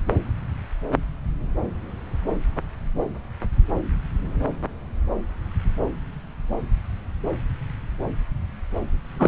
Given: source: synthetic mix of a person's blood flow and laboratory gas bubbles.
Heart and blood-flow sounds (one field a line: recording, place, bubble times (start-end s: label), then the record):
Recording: Doppler ultrasound of blood flow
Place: subclavian vein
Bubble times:
9.19-9.28 s: bubbles
From the record:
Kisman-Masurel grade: 113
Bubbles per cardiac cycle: 1 to 2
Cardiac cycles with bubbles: 1 to 10%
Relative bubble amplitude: loud (0.450 to 0.775)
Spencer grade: 1 (occasional bubble signal discernible with the cardiac motion signal, with majority of cardiac periods free of bubbles)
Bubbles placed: anywhere in the cardiac cycle